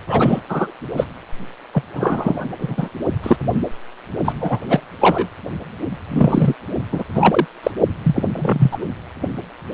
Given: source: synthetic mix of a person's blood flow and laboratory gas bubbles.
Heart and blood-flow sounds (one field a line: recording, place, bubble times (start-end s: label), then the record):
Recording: Doppler ultrasound of blood flow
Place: precordium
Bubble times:
0.08-0.40 s: bubbles
0.49-0.72 s: bubbles
0.97-1.06 s: bubbles
1.72-1.83 s: bubbles
1.93-2.48 s: bubbles
2.58-2.89 s: bubbles
3.23-3.37 s: bubbles
4.19-4.60 s: bubbles
4.68-4.80 s: bubbles
5.00-5.27 s: bubbles
6.08-6.53 s: bubbles
6.92-7.04 s: bubbles
7.14-7.46 s: bubbles
7.63-7.71 s: bubbles
8.04-8.24 s: bubbles
8.33-8.79 s: bubbles
From the record:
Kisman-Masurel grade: 243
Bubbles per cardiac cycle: several, 3 to 8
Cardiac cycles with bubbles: 100%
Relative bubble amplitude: loud (0.450 to 0.775)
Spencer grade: 3 (all of the cardiac periods contain showers or single bubble signals, but not dominating or overriding the cardiac motion signals)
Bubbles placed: anywhere in the cardiac cycle